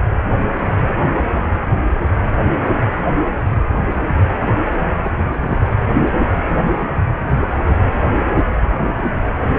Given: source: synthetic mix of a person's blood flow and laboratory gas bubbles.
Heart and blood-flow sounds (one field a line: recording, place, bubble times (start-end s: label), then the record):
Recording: Doppler ultrasound of blood flow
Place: precordium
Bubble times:
2.18-2.35 s: bubbles
4.33-4.51 s: bubbles
5.03-5.11 s: bubbles
5.42-5.67 s: bubbles
6.72-6.87 s: bubbles
From the record:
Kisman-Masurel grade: 121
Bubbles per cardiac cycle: 1 to 2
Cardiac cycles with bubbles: 10 to 50%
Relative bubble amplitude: barely perceptible (0.100 to 0.250)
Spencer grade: 2 (many but less than half of the cardiac periods contain bubble signals, singularly or in groups)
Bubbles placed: anywhere in the cardiac cycle